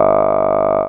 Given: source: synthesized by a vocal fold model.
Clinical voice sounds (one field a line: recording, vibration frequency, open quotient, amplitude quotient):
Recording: sustained vowel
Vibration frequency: 50 Hz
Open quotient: 0.1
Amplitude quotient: 1.4